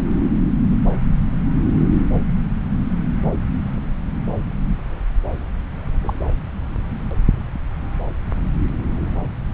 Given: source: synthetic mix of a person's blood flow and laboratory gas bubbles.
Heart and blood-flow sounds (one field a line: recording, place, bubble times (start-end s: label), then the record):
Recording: Doppler ultrasound of blood flow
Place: subclavian vein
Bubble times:
6.01-6.20 s: bubbles
From the record:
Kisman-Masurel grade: 121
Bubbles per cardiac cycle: 1 to 2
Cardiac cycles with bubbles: 10 to 50%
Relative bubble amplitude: barely perceptible (0.100 to 0.250)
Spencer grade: 2 (many but less than half of the cardiac periods contain bubble signals, singularly or in groups)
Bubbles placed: anywhere in the cardiac cycle